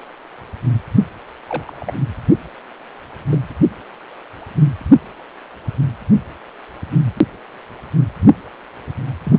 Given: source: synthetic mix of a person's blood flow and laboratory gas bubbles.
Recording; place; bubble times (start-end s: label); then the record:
Doppler ultrasound of blood flow; precordium
1.47-1.93 s: bubbles
3.29-3.38 s: bubbles
9.25-9.39 s: bubbles
From the record:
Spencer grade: 2 (many but less than half of the cardiac periods contain bubble signals, singularly or in groups); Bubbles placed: only in the low amplitude regions of the cardiac cycle